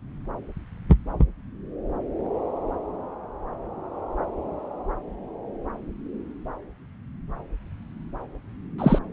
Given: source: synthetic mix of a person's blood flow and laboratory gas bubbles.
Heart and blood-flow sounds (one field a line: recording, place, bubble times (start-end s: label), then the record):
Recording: Doppler ultrasound of blood flow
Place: subclavian vein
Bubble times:
8.78-8.99 s: bubbles
From the record:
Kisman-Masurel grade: 223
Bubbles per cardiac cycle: several, 3 to 8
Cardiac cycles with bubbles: 10 to 50%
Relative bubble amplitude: loud (0.450 to 0.775)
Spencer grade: 2 (many but less than half of the cardiac periods contain bubble signals, singularly or in groups)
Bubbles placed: anywhere in the cardiac cycle